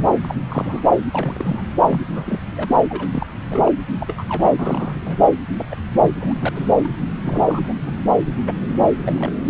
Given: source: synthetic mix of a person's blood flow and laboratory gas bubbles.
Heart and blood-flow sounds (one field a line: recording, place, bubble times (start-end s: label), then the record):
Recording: Doppler ultrasound of blood flow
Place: subclavian vein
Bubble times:
0.21-0.35 s: bubbles
0.48-0.80 s: bubbles
0.83-0.89 s: bubbles
1.11-1.61 s: bubbles
1.88-2.44 s: bubbles
2.56-2.69 s: bubbles
2.89-3.26 s: bubbles
3.50-3.61 s: bubbles
3.65-3.72 s: bubbles
3.98-4.24 s: bubbles
4.29-4.54 s: bubbles
4.59-5.19 s: bubbles
5.57-5.66 s: bubbles
5.71-5.75 s: bubbles
6.03-6.11 s: bubbles
6.20-6.70 s: bubbles
6.83-6.91 s: bubbles
7.25-7.61 s: bubbles
7.64-7.74 s: bubbles
7.86-7.92 s: bubbles
8.46-8.57 s: bubbles
9.01-9.32 s: bubbles
From the record:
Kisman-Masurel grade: 242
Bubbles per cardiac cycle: several, 3 to 8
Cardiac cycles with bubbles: 100%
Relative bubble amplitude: moderate (0.250 to 0.450)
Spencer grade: 3 (all of the cardiac periods contain showers or single bubble signals, but not dominating or overriding the cardiac motion signals)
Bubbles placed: anywhere in the cardiac cycle